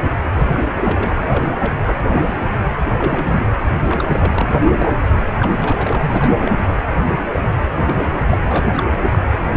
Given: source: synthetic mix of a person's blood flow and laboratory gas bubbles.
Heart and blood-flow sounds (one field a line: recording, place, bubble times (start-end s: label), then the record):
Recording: Doppler ultrasound of blood flow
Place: precordium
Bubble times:
0.03-0.10 s: bubbles
0.33-0.50 s: bubbles
0.53-0.61 s: bubbles
0.84-1.11 s: bubbles
1.30-1.48 s: bubbles
1.59-1.73 s: bubbles
1.85-1.96 s: bubbles
2.08-2.48 s: bubbles
2.98-3.50 s: bubbles
3.88-4.49 s: bubbles
4.51-4.59 s: bubbles
4.66-4.95 s: bubbles
5.41-6.37 s: bubbles
6.40-6.77 s: bubbles
6.90-7.15 s: bubbles
7.33-7.42 s: bubbles
7.85-8.07 s: bubbles
8.31-8.38 s: bubbles
8.42-8.88 s: bubbles
9.12-9.19 s: bubbles
9.32-9.38 s: bubbles
9.49-9.57 s: bubbles
From the record:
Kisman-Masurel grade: 242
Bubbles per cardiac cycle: several, 3 to 8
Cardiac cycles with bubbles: 100%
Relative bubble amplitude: moderate (0.250 to 0.450)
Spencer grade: 3 (all of the cardiac periods contain showers or single bubble signals, but not dominating or overriding the cardiac motion signals)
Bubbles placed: anywhere in the cardiac cycle